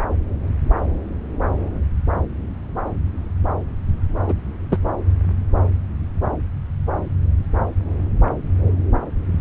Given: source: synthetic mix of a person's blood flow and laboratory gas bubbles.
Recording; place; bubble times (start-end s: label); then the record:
Doppler ultrasound of blood flow; subclavian vein
4.27-4.33 s: bubbles
4.71-4.77 s: bubbles
From the record:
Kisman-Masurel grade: 113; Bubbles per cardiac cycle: 1 to 2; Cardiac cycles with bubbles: 1 to 10%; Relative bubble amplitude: loud (0.450 to 0.775); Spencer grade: 1 (occasional bubble signal discernible with the cardiac motion signal, with majority of cardiac periods free of bubbles); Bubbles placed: anywhere in the cardiac cycle